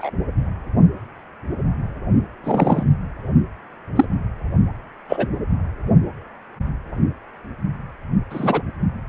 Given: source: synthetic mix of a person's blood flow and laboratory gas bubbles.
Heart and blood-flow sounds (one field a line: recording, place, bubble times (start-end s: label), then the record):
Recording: Doppler ultrasound of blood flow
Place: precordium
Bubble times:
0.00-0.10 s: bubbles
2.43-2.83 s: bubbles
3.96-4.06 s: bubbles
5.08-5.28 s: bubbles
8.30-8.62 s: bubbles
From the record:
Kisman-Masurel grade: 123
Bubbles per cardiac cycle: 1 to 2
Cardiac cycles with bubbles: 10 to 50%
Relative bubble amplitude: loud (0.450 to 0.775)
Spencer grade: 2 (many but less than half of the cardiac periods contain bubble signals, singularly or in groups)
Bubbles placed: anywhere in the cardiac cycle